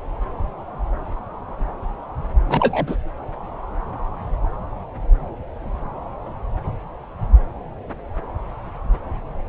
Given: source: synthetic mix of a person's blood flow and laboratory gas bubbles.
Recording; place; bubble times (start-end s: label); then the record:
Doppler ultrasound of blood flow; subclavian vein
2.48-2.97 s: bubbles
From the record:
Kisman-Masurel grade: 213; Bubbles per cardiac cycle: several, 3 to 8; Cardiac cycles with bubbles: 1 to 10%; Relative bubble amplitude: loud (0.450 to 0.775); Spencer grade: 1 (occasional bubble signal discernible with the cardiac motion signal, with majority of cardiac periods free of bubbles); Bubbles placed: anywhere in the cardiac cycle